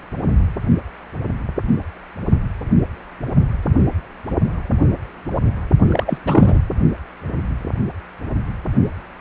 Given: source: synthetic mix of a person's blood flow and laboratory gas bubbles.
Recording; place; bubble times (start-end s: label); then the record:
Doppler ultrasound of blood flow; precordium
5.87-6.18 s: bubbles
6.25-6.59 s: bubbles
From the record:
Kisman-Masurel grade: 212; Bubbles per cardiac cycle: several, 3 to 8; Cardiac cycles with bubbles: 1 to 10%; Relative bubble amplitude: moderate (0.250 to 0.450); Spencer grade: 1 (occasional bubble signal discernible with the cardiac motion signal, with majority of cardiac periods free of bubbles); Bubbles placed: only in the low amplitude regions of the cardiac cycle